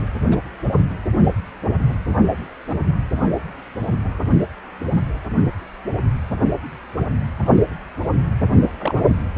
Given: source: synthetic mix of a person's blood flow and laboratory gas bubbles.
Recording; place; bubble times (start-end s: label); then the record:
Doppler ultrasound of blood flow; precordium
0.30-0.38 s: bubbles
2.69-2.75 s: bubbles
8.80-9.01 s: bubbles
From the record:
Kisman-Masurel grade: 122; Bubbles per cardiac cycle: 1 to 2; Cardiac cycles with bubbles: 10 to 50%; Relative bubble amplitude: moderate (0.250 to 0.450); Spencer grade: 2 (many but less than half of the cardiac periods contain bubble signals, singularly or in groups); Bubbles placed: anywhere in the cardiac cycle